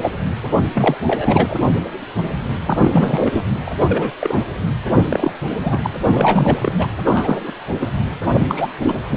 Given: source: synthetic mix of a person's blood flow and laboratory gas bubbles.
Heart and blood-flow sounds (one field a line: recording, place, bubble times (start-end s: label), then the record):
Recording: Doppler ultrasound of blood flow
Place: precordium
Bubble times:
0.02-0.10 s: bubbles
0.74-0.95 s: bubbles
1.06-1.54 s: bubbles
2.66-3.44 s: bubbles
3.66-3.71 s: bubbles
3.80-4.11 s: bubbles
4.21-4.39 s: bubbles
5.09-5.33 s: bubbles
5.62-5.89 s: bubbles
6.04-6.88 s: bubbles
7.03-7.53 s: bubbles
7.79-7.88 s: bubbles
8.33-8.67 s: bubbles
8.81-8.95 s: bubbles
9.11-9.17 s: bubbles
From the record:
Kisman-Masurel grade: 233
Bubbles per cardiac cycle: several, 3 to 8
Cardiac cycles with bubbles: 50 to 99%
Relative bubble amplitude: loud (0.450 to 0.775)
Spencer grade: 3 (all of the cardiac periods contain showers or single bubble signals, but not dominating or overriding the cardiac motion signals)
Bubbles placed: anywhere in the cardiac cycle